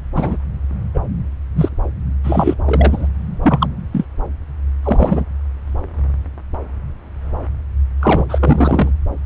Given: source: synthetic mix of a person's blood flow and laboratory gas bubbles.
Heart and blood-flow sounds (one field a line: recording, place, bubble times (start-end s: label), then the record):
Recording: Doppler ultrasound of blood flow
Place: subclavian vein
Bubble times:
0.14-0.36 s: bubbles
0.94-1.01 s: bubbles
1.55-1.69 s: bubbles
2.23-2.54 s: bubbles
2.65-3.07 s: bubbles
3.42-3.67 s: bubbles
3.92-4.04 s: bubbles
4.83-5.25 s: bubbles
8.00-8.26 s: bubbles
8.29-8.92 s: bubbles
From the record:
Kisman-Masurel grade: 233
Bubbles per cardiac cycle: several, 3 to 8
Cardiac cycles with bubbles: 50 to 99%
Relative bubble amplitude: loud (0.450 to 0.775)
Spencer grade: 3 (all of the cardiac periods contain showers or single bubble signals, but not dominating or overriding the cardiac motion signals)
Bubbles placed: anywhere in the cardiac cycle